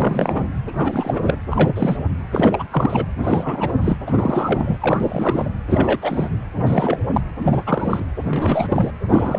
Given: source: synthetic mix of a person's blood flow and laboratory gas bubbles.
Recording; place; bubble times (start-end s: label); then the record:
Doppler ultrasound of blood flow; precordium
0.00-0.45 s: bubbles
0.68-1.35 s: bubbles
1.51-1.98 s: bubbles
2.31-2.68 s: bubbles
2.71-3.06 s: bubbles
3.15-3.73 s: bubbles
3.81-3.97 s: bubbles
4.06-4.77 s: bubbles
4.80-5.51 s: bubbles
5.68-6.29 s: bubbles
6.55-7.04 s: bubbles
7.12-7.21 s: bubbles
7.40-8.06 s: bubbles
8.25-8.92 s: bubbles
9.09-9.39 s: bubbles
From the record:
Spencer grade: 3 (all of the cardiac periods contain showers or single bubble signals, but not dominating or overriding the cardiac motion signals); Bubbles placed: anywhere in the cardiac cycle